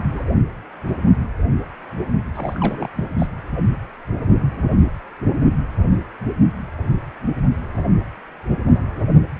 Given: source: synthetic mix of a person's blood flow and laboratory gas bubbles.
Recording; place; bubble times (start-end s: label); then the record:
Doppler ultrasound of blood flow; precordium
0.10-0.23 s: bubbles
2.34-2.88 s: bubbles
2.96-3.05 s: bubbles
3.18-3.27 s: bubbles
From the record:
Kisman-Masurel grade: 221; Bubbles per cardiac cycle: several, 3 to 8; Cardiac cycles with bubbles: 10 to 50%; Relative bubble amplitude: barely perceptible (0.100 to 0.250); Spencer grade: 2 (many but less than half of the cardiac periods contain bubble signals, singularly or in groups); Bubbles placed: only in the low amplitude regions of the cardiac cycle